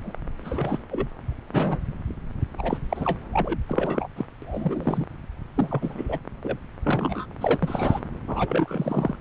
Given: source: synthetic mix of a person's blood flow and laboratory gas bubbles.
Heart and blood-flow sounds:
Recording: Doppler ultrasound of blood flow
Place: subclavian vein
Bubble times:
0.00-0.12 s: bubbles
0.41-0.80 s: bubbles
0.91-1.07 s: bubbles
1.49-1.82 s: bubbles
2.58-2.77 s: bubbles
2.89-3.19 s: bubbles
3.33-3.58 s: bubbles
3.62-4.08 s: bubbles
4.16-4.25 s: bubbles
4.42-5.05 s: bubbles
5.54-6.17 s: bubbles
6.42-6.56 s: bubbles
6.83-7.25 s: bubbles
7.41-7.58 s: bubbles
7.63-8.00 s: bubbles
8.27-9.15 s: bubbles
From the record:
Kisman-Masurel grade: 242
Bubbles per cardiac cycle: several, 3 to 8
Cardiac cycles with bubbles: 100%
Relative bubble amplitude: moderate (0.250 to 0.450)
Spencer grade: 3 (all of the cardiac periods contain showers or single bubble signals, but not dominating or overriding the cardiac motion signals)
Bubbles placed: anywhere in the cardiac cycle

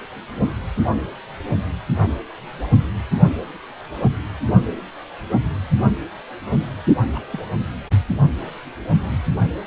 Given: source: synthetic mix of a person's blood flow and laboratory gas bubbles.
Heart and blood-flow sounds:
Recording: Doppler ultrasound of blood flow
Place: precordium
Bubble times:
7.14-7.21 s: bubbles
7.30-7.40 s: bubbles
From the record:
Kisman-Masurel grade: 111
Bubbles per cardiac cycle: 1 to 2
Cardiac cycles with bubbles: 1 to 10%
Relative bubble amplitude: barely perceptible (0.100 to 0.250)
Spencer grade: 1 (occasional bubble signal discernible with the cardiac motion signal, with majority of cardiac periods free of bubbles)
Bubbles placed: only in the low amplitude regions of the cardiac cycle

